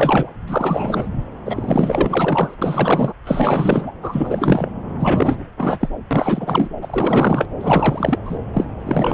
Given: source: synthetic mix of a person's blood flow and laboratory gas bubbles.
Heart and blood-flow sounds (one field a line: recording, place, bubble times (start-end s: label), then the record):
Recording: Doppler ultrasound of blood flow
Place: subclavian vein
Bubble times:
0.00-0.35 s: bubbles
0.47-1.07 s: bubbles
1.45-2.57 s: bubbles
2.61-3.13 s: bubbles
3.25-3.92 s: bubbles
4.01-4.72 s: bubbles
5.00-5.44 s: bubbles
5.58-5.89 s: bubbles
6.10-6.68 s: bubbles
6.81-7.48 s: bubbles
7.59-8.21 s: bubbles
8.24-8.37 s: bubbles
8.53-8.68 s: bubbles
8.79-9.13 s: bubbles
From the record:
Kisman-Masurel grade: 444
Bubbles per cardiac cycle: continuous sound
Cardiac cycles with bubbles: 100%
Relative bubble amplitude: maximal (0.775 to 0.999)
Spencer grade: 4 (maximum detectable bubble signal sounding continuously throughout systole and diastole of every cardiac period, and overriding the amplitude of the normal cardiac signals)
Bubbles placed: anywhere in the cardiac cycle